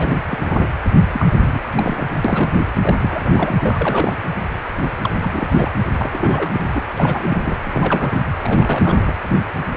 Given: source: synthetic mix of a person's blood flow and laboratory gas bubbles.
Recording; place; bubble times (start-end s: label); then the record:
Doppler ultrasound of blood flow; precordium
0.00-0.18 s: bubbles
0.26-0.67 s: bubbles
1.12-1.59 s: bubbles
1.75-2.09 s: bubbles
2.25-2.58 s: bubbles
2.81-3.55 s: bubbles
3.60-4.13 s: bubbles
5.01-5.12 s: bubbles
5.19-5.69 s: bubbles
5.98-6.82 s: bubbles
6.98-7.58 s: bubbles
7.65-8.21 s: bubbles
8.42-9.14 s: bubbles
From the record:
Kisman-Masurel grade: 332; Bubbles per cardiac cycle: rolling drumbeat, 9 or more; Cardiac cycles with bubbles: 50 to 99%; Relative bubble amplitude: moderate (0.250 to 0.450); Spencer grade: 3 (all of the cardiac periods contain showers or single bubble signals, but not dominating or overriding the cardiac motion signals); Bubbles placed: anywhere in the cardiac cycle